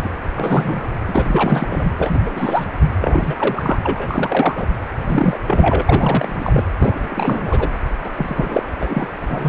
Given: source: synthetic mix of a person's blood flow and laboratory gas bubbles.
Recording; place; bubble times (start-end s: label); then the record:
Doppler ultrasound of blood flow; precordium
0.04-0.10 s: bubbles
0.30-0.90 s: bubbles
1.07-1.93 s: bubbles
1.98-2.66 s: bubbles
3.00-3.35 s: bubbles
3.38-3.78 s: bubbles
3.82-4.67 s: bubbles
5.07-5.38 s: bubbles
5.47-5.82 s: bubbles
5.85-6.64 s: bubbles
6.79-7.70 s: bubbles
8.04-8.11 s: bubbles
8.13-8.67 s: bubbles
8.79-9.07 s: bubbles
9.28-9.48 s: bubbles
From the record:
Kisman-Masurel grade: 343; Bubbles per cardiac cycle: rolling drumbeat, 9 or more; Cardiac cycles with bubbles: 100%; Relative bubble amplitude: loud (0.450 to 0.775); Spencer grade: 3 (all of the cardiac periods contain showers or single bubble signals, but not dominating or overriding the cardiac motion signals); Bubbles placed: anywhere in the cardiac cycle